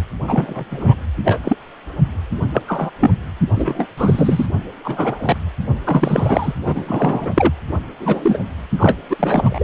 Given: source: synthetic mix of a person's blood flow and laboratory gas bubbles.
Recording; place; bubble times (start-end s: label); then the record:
Doppler ultrasound of blood flow; precordium
0.28-0.65 s: bubbles
0.70-0.94 s: bubbles
1.25-1.38 s: bubbles
1.44-1.57 s: bubbles
2.42-2.44 s: bubbles
2.52-2.62 s: bubbles
2.67-2.90 s: bubbles
2.99-3.17 s: bubbles
3.55-3.86 s: bubbles
3.97-4.46 s: bubbles
4.84-5.37 s: bubbles
5.85-6.54 s: bubbles
6.66-7.53 s: bubbles
7.99-8.38 s: bubbles
8.78-8.98 s: bubbles
9.09-9.64 s: bubbles
From the record:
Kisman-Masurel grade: 243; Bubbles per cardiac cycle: several, 3 to 8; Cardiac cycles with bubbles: 100%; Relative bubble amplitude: loud (0.450 to 0.775); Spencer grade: 3 (all of the cardiac periods contain showers or single bubble signals, but not dominating or overriding the cardiac motion signals); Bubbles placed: anywhere in the cardiac cycle